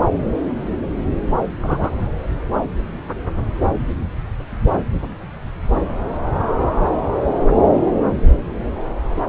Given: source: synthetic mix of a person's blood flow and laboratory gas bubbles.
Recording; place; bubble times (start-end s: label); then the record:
Doppler ultrasound of blood flow; subclavian vein
1.62-1.92 s: bubbles
From the record:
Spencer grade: 1 (occasional bubble signal discernible with the cardiac motion signal, with majority of cardiac periods free of bubbles); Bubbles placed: anywhere in the cardiac cycle